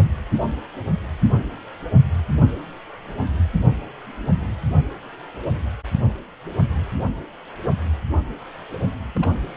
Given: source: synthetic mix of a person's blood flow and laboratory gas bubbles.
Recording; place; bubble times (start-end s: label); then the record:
Doppler ultrasound of blood flow; precordium
9.15-9.31 s: bubbles
From the record:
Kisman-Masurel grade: 111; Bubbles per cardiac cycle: 1 to 2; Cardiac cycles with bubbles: 1 to 10%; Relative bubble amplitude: barely perceptible (0.100 to 0.250); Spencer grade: 1 (occasional bubble signal discernible with the cardiac motion signal, with majority of cardiac periods free of bubbles); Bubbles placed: only in the low amplitude regions of the cardiac cycle